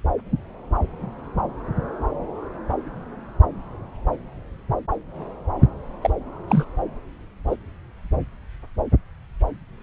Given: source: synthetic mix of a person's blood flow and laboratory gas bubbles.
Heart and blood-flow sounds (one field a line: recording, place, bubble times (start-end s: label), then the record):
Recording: Doppler ultrasound of blood flow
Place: subclavian vein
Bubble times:
6.01-6.10 s: bubbles
6.47-6.65 s: bubbles
7.47-7.55 s: bubbles
From the record:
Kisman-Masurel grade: 122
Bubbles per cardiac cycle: 1 to 2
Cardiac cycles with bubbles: 10 to 50%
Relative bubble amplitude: moderate (0.250 to 0.450)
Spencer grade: 2 (many but less than half of the cardiac periods contain bubble signals, singularly or in groups)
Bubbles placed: anywhere in the cardiac cycle